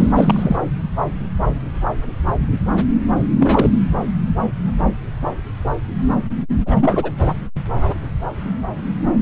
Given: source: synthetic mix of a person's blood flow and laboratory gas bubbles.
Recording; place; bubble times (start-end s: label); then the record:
Doppler ultrasound of blood flow; subclavian vein
0.00-0.12 s: bubbles
0.15-0.56 s: bubbles
3.40-3.80 s: bubbles
6.66-7.11 s: bubbles
From the record:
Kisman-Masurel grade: 222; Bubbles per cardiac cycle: several, 3 to 8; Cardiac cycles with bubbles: 10 to 50%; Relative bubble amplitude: moderate (0.250 to 0.450); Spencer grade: 2 (many but less than half of the cardiac periods contain bubble signals, singularly or in groups); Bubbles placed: anywhere in the cardiac cycle